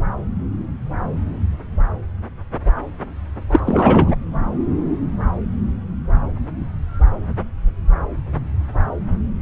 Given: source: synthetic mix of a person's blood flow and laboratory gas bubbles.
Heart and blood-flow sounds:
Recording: Doppler ultrasound of blood flow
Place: subclavian vein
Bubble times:
3.51-3.59 s: bubbles
3.65-4.16 s: bubbles
From the record:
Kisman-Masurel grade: 213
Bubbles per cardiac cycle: several, 3 to 8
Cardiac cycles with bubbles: 1 to 10%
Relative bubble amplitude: loud (0.450 to 0.775)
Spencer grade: 1 (occasional bubble signal discernible with the cardiac motion signal, with majority of cardiac periods free of bubbles)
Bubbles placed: anywhere in the cardiac cycle

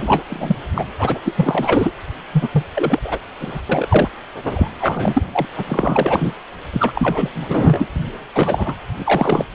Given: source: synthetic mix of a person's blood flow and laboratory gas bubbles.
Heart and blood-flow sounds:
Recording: Doppler ultrasound of blood flow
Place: precordium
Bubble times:
0.00-0.23 s: bubbles
0.30-0.57 s: bubbles
0.75-0.86 s: bubbles
0.98-1.19 s: bubbles
1.25-1.92 s: bubbles
2.33-2.48 s: bubbles
2.52-2.63 s: bubbles
2.75-2.99 s: bubbles
3.04-3.19 s: bubbles
3.40-3.62 s: bubbles
3.69-4.09 s: bubbles
4.43-4.68 s: bubbles
4.79-5.23 s: bubbles
5.31-5.46 s: bubbles
5.57-6.34 s: bubbles
6.72-7.29 s: bubbles
7.35-7.87 s: bubbles
8.04-8.07 s: bubbles
8.35-8.76 s: bubbles
8.98-9.45 s: bubbles
From the record:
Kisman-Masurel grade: 333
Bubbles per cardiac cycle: rolling drumbeat, 9 or more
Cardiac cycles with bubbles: 50 to 99%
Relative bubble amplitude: loud (0.450 to 0.775)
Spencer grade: 3 (all of the cardiac periods contain showers or single bubble signals, but not dominating or overriding the cardiac motion signals)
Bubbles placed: anywhere in the cardiac cycle

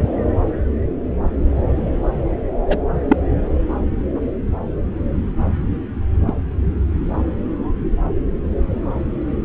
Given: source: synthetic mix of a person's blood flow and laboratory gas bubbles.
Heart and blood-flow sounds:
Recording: Doppler ultrasound of blood flow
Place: subclavian vein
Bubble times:
2.68-2.77 s: bubbles
3.08-3.17 s: bubbles
6.26-6.33 s: bubbles
From the record:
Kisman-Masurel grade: 123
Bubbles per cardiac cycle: 1 to 2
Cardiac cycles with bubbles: 10 to 50%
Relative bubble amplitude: loud (0.450 to 0.775)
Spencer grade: 2 (many but less than half of the cardiac periods contain bubble signals, singularly or in groups)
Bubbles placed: anywhere in the cardiac cycle

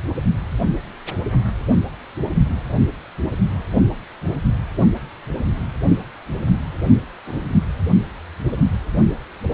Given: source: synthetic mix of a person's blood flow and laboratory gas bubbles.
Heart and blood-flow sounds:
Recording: Doppler ultrasound of blood flow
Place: precordium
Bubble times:
7.25-7.46 s: bubbles
From the record:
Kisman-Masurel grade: 111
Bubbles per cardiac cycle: 1 to 2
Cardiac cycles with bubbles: 1 to 10%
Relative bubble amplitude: barely perceptible (0.100 to 0.250)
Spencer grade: 1 (occasional bubble signal discernible with the cardiac motion signal, with majority of cardiac periods free of bubbles)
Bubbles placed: only in the low amplitude regions of the cardiac cycle

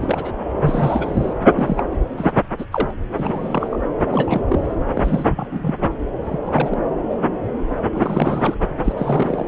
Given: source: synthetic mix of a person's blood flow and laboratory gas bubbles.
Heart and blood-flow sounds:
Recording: Doppler ultrasound of blood flow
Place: subclavian vein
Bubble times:
0.00-0.33 s: bubbles
0.60-1.33 s: bubbles
1.56-1.86 s: bubbles
1.92-1.96 s: bubbles
1.99-2.05 s: bubbles
2.17-2.32 s: bubbles
2.58-2.65 s: bubbles
2.71-2.91 s: bubbles
3.17-3.78 s: bubbles
4.08-4.42 s: bubbles
4.48-4.75 s: bubbles
4.94-5.25 s: bubbles
5.36-5.75 s: bubbles
6.24-6.40 s: bubbles
6.45-6.77 s: bubbles
7.93-8.55 s: bubbles
8.84-8.92 s: bubbles
8.96-9.46 s: bubbles
From the record:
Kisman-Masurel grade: 232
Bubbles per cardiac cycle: several, 3 to 8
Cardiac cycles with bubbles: 50 to 99%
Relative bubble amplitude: moderate (0.250 to 0.450)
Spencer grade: 3 (all of the cardiac periods contain showers or single bubble signals, but not dominating or overriding the cardiac motion signals)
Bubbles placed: anywhere in the cardiac cycle

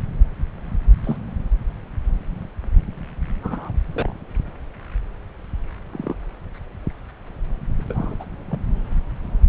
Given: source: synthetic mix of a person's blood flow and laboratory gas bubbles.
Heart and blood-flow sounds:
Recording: Doppler ultrasound of blood flow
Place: subclavian vein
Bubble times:
1.04-1.17 s: bubbles
3.43-3.72 s: bubbles
3.93-4.12 s: bubbles
5.93-6.14 s: bubbles
7.79-8.16 s: bubbles
8.20-8.25 s: bubbles
8.51-8.58 s: bubbles
From the record:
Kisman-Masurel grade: 121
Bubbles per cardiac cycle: 1 to 2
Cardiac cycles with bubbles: 10 to 50%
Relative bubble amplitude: barely perceptible (0.100 to 0.250)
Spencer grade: 2 (many but less than half of the cardiac periods contain bubble signals, singularly or in groups)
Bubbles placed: anywhere in the cardiac cycle

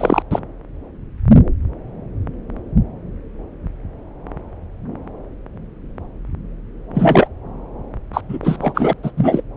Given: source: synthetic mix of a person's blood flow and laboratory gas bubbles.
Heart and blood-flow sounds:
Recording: Doppler ultrasound of blood flow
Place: subclavian vein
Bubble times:
0.00-0.22 s: bubbles
0.31-0.40 s: bubbles
6.94-7.28 s: bubbles
8.13-8.21 s: bubbles
8.29-8.38 s: bubbles
8.42-8.93 s: bubbles
9.03-9.11 s: bubbles
9.17-9.42 s: bubbles
From the record:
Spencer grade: 2 (many but less than half of the cardiac periods contain bubble signals, singularly or in groups)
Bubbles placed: anywhere in the cardiac cycle

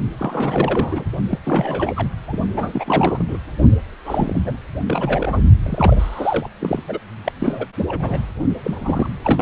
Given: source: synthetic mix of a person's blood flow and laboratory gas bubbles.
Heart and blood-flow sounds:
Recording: Doppler ultrasound of blood flow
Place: precordium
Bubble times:
0.19-1.04 s: bubbles
1.29-1.39 s: bubbles
1.44-1.92 s: bubbles
1.96-2.08 s: bubbles
2.27-2.37 s: bubbles
2.56-3.23 s: bubbles
3.27-3.38 s: bubbles
4.05-4.57 s: bubbles
4.86-5.42 s: bubbles
5.63-6.49 s: bubbles
6.59-6.83 s: bubbles
6.88-6.99 s: bubbles
7.24-7.32 s: bubbles
7.40-7.67 s: bubbles
7.88-8.20 s: bubbles
8.64-9.08 s: bubbles
9.24-9.42 s: bubbles
From the record:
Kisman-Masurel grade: 342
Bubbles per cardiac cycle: rolling drumbeat, 9 or more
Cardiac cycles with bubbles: 100%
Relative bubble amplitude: moderate (0.250 to 0.450)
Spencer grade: 3 (all of the cardiac periods contain showers or single bubble signals, but not dominating or overriding the cardiac motion signals)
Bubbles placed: only in the low amplitude regions of the cardiac cycle

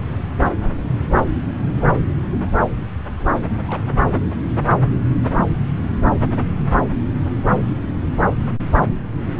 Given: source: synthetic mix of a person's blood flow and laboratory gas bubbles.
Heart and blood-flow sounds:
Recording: Doppler ultrasound of blood flow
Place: subclavian vein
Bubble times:
3.67-3.83 s: bubbles
4.06-4.10 s: bubbles
From the record:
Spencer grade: 1 (occasional bubble signal discernible with the cardiac motion signal, with majority of cardiac periods free of bubbles)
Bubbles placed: anywhere in the cardiac cycle

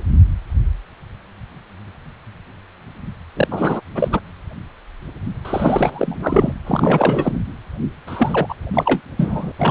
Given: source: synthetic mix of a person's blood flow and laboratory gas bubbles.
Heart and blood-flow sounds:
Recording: Doppler ultrasound of blood flow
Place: precordium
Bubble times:
3.35-3.47 s: bubbles
3.50-3.80 s: bubbles
3.94-4.20 s: bubbles
5.44-6.52 s: bubbles
6.66-7.39 s: bubbles
8.07-8.54 s: bubbles
8.74-9.01 s: bubbles
9.16-9.53 s: bubbles
9.59-9.71 s: bubbles
From the record:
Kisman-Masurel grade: 333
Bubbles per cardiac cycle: rolling drumbeat, 9 or more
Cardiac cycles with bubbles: 50 to 99%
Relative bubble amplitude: loud (0.450 to 0.775)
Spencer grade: 3 (all of the cardiac periods contain showers or single bubble signals, but not dominating or overriding the cardiac motion signals)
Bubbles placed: anywhere in the cardiac cycle

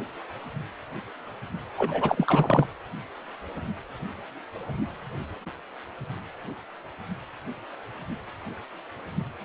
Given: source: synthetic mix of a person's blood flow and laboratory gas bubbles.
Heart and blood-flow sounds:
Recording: Doppler ultrasound of blood flow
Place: precordium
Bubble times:
1.78-2.67 s: bubbles
From the record:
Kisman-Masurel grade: 222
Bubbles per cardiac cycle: several, 3 to 8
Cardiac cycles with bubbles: 10 to 50%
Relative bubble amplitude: moderate (0.250 to 0.450)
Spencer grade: 2 (many but less than half of the cardiac periods contain bubble signals, singularly or in groups)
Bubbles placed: anywhere in the cardiac cycle

